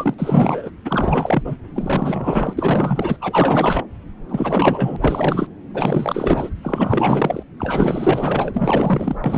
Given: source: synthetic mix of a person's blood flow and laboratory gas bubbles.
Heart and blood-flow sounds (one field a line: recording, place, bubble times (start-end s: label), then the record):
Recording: Doppler ultrasound of blood flow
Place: subclavian vein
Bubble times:
0.00-0.14 s: bubbles
0.18-0.70 s: bubbles
0.84-1.56 s: bubbles
1.75-2.53 s: bubbles
2.57-3.17 s: bubbles
3.21-3.84 s: bubbles
4.29-4.97 s: bubbles
5.00-5.47 s: bubbles
5.74-6.50 s: bubbles
6.62-7.43 s: bubbles
7.59-9.15 s: bubbles
9.24-9.38 s: bubbles
From the record:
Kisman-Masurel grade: 444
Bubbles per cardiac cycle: continuous sound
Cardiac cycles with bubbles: 100%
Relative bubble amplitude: maximal (0.775 to 0.999)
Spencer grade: 4 (maximum detectable bubble signal sounding continuously throughout systole and diastole of every cardiac period, and overriding the amplitude of the normal cardiac signals)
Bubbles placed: anywhere in the cardiac cycle